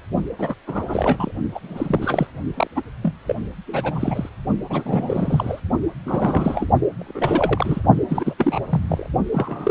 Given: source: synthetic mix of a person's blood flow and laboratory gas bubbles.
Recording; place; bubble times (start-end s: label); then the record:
Doppler ultrasound of blood flow; precordium
0.38-0.55 s: bubbles
0.67-1.31 s: bubbles
1.55-1.59 s: bubbles
1.62-2.27 s: bubbles
2.56-2.67 s: bubbles
2.75-2.81 s: bubbles
3.02-3.12 s: bubbles
3.25-3.35 s: bubbles
3.67-4.29 s: bubbles
4.70-5.60 s: bubbles
6.05-6.70 s: bubbles
6.99-7.81 s: bubbles
8.08-8.34 s: bubbles
8.38-8.60 s: bubbles
8.69-9.07 s: bubbles
9.32-9.71 s: bubbles
From the record:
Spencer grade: 3 (all of the cardiac periods contain showers or single bubble signals, but not dominating or overriding the cardiac motion signals); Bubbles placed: only in the low amplitude regions of the cardiac cycle